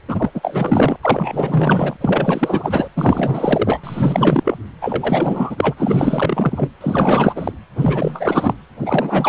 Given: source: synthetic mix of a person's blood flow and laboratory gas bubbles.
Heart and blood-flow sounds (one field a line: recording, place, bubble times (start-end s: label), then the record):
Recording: Doppler ultrasound of blood flow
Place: precordium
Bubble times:
0.09-0.30 s: bubbles
0.34-0.97 s: bubbles
1.03-1.96 s: bubbles
2.00-2.88 s: bubbles
2.96-3.80 s: bubbles
3.83-4.58 s: bubbles
4.81-5.75 s: bubbles
5.77-6.68 s: bubbles
6.80-7.53 s: bubbles
7.75-8.53 s: bubbles
8.80-9.29 s: bubbles
From the record:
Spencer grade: 4 (maximum detectable bubble signal sounding continuously throughout systole and diastole of every cardiac period, and overriding the amplitude of the normal cardiac signals)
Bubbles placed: anywhere in the cardiac cycle